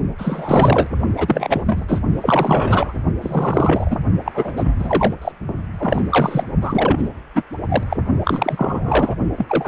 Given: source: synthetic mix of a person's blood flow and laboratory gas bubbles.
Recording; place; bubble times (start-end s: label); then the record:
Doppler ultrasound of blood flow; precordium
0.18-0.86 s: bubbles
1.17-1.85 s: bubbles
1.87-2.01 s: bubbles
2.21-2.93 s: bubbles
3.21-3.97 s: bubbles
4.25-4.52 s: bubbles
4.56-5.15 s: bubbles
5.21-5.32 s: bubbles
5.79-6.04 s: bubbles
6.09-6.43 s: bubbles
6.61-7.08 s: bubbles
7.34-7.43 s: bubbles
7.69-7.83 s: bubbles
7.89-7.96 s: bubbles
8.24-9.15 s: bubbles
9.37-9.68 s: bubbles
From the record:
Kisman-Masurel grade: 343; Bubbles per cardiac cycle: rolling drumbeat, 9 or more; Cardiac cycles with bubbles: 100%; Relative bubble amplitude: loud (0.450 to 0.775); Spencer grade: 3 (all of the cardiac periods contain showers or single bubble signals, but not dominating or overriding the cardiac motion signals); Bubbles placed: only in the low amplitude regions of the cardiac cycle